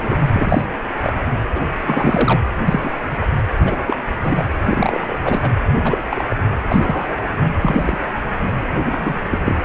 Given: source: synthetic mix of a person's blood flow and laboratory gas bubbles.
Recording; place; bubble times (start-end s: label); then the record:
Doppler ultrasound of blood flow; precordium
0.00-0.16 s: bubbles
0.33-0.66 s: bubbles
1.04-1.12 s: bubbles
1.55-1.61 s: bubbles
1.85-2.42 s: bubbles
2.65-2.92 s: bubbles
3.21-3.26 s: bubbles
3.59-3.75 s: bubbles
3.87-3.96 s: bubbles
4.23-4.45 s: bubbles
4.65-5.19 s: bubbles
5.24-5.51 s: bubbles
5.83-5.99 s: bubbles
6.11-6.37 s: bubbles
6.69-7.19 s: bubbles
7.61-8.00 s: bubbles
8.61-8.67 s: bubbles
8.91-9.21 s: bubbles
9.30-9.38 s: bubbles
9.44-9.55 s: bubbles
9.62-9.65 s: bubbles
From the record:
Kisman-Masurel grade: 232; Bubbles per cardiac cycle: several, 3 to 8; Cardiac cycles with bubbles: 50 to 99%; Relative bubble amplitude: moderate (0.250 to 0.450); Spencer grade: 3 (all of the cardiac periods contain showers or single bubble signals, but not dominating or overriding the cardiac motion signals); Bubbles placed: anywhere in the cardiac cycle